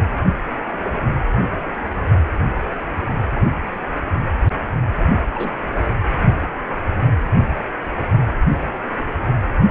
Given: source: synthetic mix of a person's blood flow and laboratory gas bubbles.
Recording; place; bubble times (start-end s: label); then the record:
Doppler ultrasound of blood flow; precordium
5.31-5.62 s: bubbles
From the record:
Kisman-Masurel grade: 122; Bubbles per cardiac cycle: 1 to 2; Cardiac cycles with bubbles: 10 to 50%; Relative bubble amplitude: moderate (0.250 to 0.450); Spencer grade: 2 (many but less than half of the cardiac periods contain bubble signals, singularly or in groups); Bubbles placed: only in the low amplitude regions of the cardiac cycle